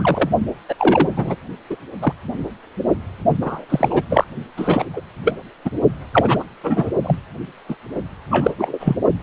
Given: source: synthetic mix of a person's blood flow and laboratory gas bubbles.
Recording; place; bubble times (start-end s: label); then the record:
Doppler ultrasound of blood flow; precordium
0.00-0.29 s: bubbles
0.68-0.76 s: bubbles
0.78-1.09 s: bubbles
1.15-1.36 s: bubbles
1.69-1.76 s: bubbles
2.00-2.13 s: bubbles
3.42-3.65 s: bubbles
3.69-4.02 s: bubbles
4.09-4.25 s: bubbles
4.56-4.84 s: bubbles
4.92-5.01 s: bubbles
5.25-5.35 s: bubbles
5.65-5.71 s: bubbles
6.12-6.44 s: bubbles
6.63-6.88 s: bubbles
7.04-7.20 s: bubbles
7.68-7.75 s: bubbles
8.30-8.51 s: bubbles
8.58-8.96 s: bubbles
From the record:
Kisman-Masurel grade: 243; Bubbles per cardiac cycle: several, 3 to 8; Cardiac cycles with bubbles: 100%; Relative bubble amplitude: loud (0.450 to 0.775); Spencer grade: 3 (all of the cardiac periods contain showers or single bubble signals, but not dominating or overriding the cardiac motion signals); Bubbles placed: only in the low amplitude regions of the cardiac cycle